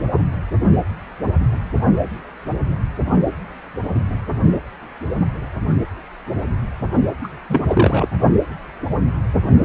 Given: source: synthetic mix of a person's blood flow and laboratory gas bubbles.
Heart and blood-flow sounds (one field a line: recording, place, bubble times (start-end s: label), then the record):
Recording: Doppler ultrasound of blood flow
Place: precordium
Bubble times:
7.23-7.28 s: bubbles
7.50-7.65 s: bubbles
7.68-8.07 s: bubbles
From the record:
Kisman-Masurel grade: 223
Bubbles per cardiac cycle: several, 3 to 8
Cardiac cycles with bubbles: 10 to 50%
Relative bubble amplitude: loud (0.450 to 0.775)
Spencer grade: 2 (many but less than half of the cardiac periods contain bubble signals, singularly or in groups)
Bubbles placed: only in the low amplitude regions of the cardiac cycle